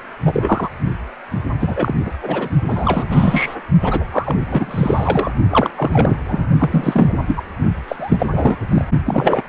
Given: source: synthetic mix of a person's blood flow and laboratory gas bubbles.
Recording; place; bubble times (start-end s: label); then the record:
Doppler ultrasound of blood flow; precordium
0.25-0.70 s: bubbles
1.59-1.94 s: bubbles
2.00-2.11 s: bubbles
2.21-2.49 s: bubbles
2.65-3.05 s: bubbles
3.10-3.55 s: bubbles
3.81-4.06 s: bubbles
4.12-4.47 s: bubbles
4.50-5.31 s: bubbles
5.50-5.70 s: bubbles
5.75-6.18 s: bubbles
6.27-6.46 s: bubbles
6.58-7.14 s: bubbles
7.26-7.42 s: bubbles
7.88-7.96 s: bubbles
7.99-8.27 s: bubbles
8.32-8.59 s: bubbles
8.71-8.85 s: bubbles
9.06-9.43 s: bubbles
From the record:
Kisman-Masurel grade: 343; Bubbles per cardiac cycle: rolling drumbeat, 9 or more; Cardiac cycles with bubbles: 100%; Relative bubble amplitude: loud (0.450 to 0.775); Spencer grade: 3 (all of the cardiac periods contain showers or single bubble signals, but not dominating or overriding the cardiac motion signals); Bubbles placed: only in the low amplitude regions of the cardiac cycle